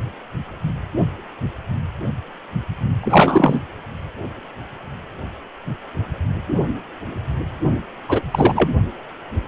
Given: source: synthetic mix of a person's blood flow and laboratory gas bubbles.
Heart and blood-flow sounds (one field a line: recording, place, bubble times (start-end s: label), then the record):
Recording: Doppler ultrasound of blood flow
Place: precordium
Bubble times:
3.00-3.61 s: bubbles
8.08-8.21 s: bubbles
8.31-8.69 s: bubbles
From the record:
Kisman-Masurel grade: 223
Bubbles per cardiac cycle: several, 3 to 8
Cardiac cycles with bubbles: 10 to 50%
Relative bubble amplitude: loud (0.450 to 0.775)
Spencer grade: 2 (many but less than half of the cardiac periods contain bubble signals, singularly or in groups)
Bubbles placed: only in the low amplitude regions of the cardiac cycle